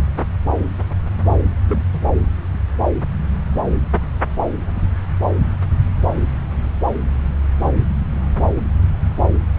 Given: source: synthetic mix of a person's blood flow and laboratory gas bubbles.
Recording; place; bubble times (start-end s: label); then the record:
Doppler ultrasound of blood flow; subclavian vein
1.68-1.83 s: bubbles
1.94-2.00 s: bubbles
From the record:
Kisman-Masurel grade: 122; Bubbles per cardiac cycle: 1 to 2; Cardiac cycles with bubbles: 10 to 50%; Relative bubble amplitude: moderate (0.250 to 0.450); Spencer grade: 2 (many but less than half of the cardiac periods contain bubble signals, singularly or in groups); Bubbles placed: anywhere in the cardiac cycle